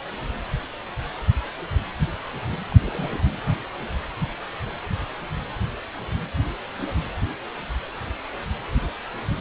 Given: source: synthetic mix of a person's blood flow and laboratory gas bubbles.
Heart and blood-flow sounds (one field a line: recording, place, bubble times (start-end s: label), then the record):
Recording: Doppler ultrasound of blood flow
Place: precordium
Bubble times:
2.71-2.76 s: bubbles
2.81-3.23 s: bubbles
From the record:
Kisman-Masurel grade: 211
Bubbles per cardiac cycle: several, 3 to 8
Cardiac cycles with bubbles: 1 to 10%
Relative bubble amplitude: barely perceptible (0.100 to 0.250)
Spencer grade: 1 (occasional bubble signal discernible with the cardiac motion signal, with majority of cardiac periods free of bubbles)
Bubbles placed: anywhere in the cardiac cycle